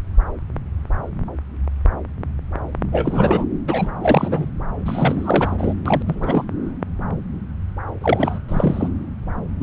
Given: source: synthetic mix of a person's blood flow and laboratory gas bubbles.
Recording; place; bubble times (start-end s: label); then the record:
Doppler ultrasound of blood flow; subclavian vein
2.92-3.45 s: bubbles
3.67-3.90 s: bubbles
4.01-4.49 s: bubbles
4.85-5.73 s: bubbles
5.85-6.02 s: bubbles
6.07-6.44 s: bubbles
8.01-8.38 s: bubbles
8.49-8.91 s: bubbles
9.61-9.63 s: bubbles
From the record:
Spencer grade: 3 (all of the cardiac periods contain showers or single bubble signals, but not dominating or overriding the cardiac motion signals); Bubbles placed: anywhere in the cardiac cycle